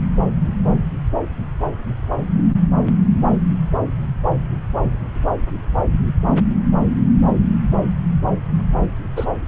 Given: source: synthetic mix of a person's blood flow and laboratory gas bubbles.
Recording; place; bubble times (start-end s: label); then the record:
Doppler ultrasound of blood flow; subclavian vein
9.16-9.26 s: bubbles
From the record:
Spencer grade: 1 (occasional bubble signal discernible with the cardiac motion signal, with majority of cardiac periods free of bubbles); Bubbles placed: anywhere in the cardiac cycle